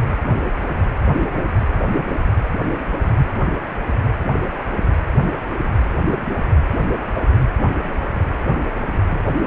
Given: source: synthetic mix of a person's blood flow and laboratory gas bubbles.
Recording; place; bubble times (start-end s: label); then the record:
Doppler ultrasound of blood flow; precordium
no bubbles
From the record:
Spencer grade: 0 (complete lack of bubble signals)